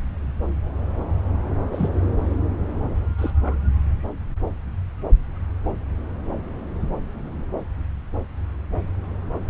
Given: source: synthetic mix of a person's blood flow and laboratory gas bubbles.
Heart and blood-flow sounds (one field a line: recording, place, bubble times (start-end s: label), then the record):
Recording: Doppler ultrasound of blood flow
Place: subclavian vein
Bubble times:
1.71-1.90 s: bubbles
3.18-3.56 s: bubbles
From the record:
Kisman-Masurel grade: 111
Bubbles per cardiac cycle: 1 to 2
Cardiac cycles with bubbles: 1 to 10%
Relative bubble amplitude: barely perceptible (0.100 to 0.250)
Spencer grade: 1 (occasional bubble signal discernible with the cardiac motion signal, with majority of cardiac periods free of bubbles)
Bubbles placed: anywhere in the cardiac cycle